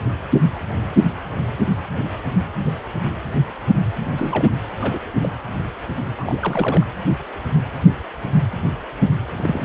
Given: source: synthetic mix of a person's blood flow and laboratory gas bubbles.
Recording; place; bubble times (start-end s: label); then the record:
Doppler ultrasound of blood flow; precordium
4.17-4.50 s: bubbles
4.81-4.99 s: bubbles
5.23-5.29 s: bubbles
6.17-6.86 s: bubbles
9.31-9.65 s: bubbles
From the record:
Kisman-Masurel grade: 222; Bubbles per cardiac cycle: several, 3 to 8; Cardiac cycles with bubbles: 10 to 50%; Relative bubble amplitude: moderate (0.250 to 0.450); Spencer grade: 2 (many but less than half of the cardiac periods contain bubble signals, singularly or in groups); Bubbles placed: anywhere in the cardiac cycle